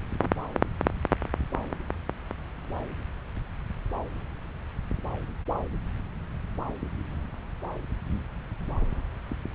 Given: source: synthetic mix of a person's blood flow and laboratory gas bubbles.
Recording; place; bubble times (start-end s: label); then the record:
Doppler ultrasound of blood flow; subclavian vein
no bubbles
From the record:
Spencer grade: 0 (complete lack of bubble signals)